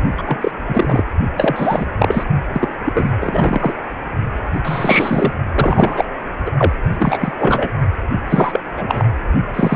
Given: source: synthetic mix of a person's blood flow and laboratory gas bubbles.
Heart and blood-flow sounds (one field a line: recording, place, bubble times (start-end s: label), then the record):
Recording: Doppler ultrasound of blood flow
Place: precordium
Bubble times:
0.17-0.22 s: bubbles
0.25-0.37 s: bubbles
0.40-0.51 s: bubbles
0.68-1.04 s: bubbles
1.36-1.86 s: bubbles
1.98-2.23 s: bubbles
2.52-2.68 s: bubbles
2.84-3.11 s: bubbles
3.20-3.73 s: bubbles
4.64-5.33 s: bubbles
5.54-6.04 s: bubbles
6.46-6.51 s: bubbles
6.58-6.72 s: bubbles
6.98-7.33 s: bubbles
7.37-7.70 s: bubbles
8.29-8.60 s: bubbles
8.77-9.05 s: bubbles
9.54-9.75 s: bubbles
From the record:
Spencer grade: 3 (all of the cardiac periods contain showers or single bubble signals, but not dominating or overriding the cardiac motion signals)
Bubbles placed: only in the low amplitude regions of the cardiac cycle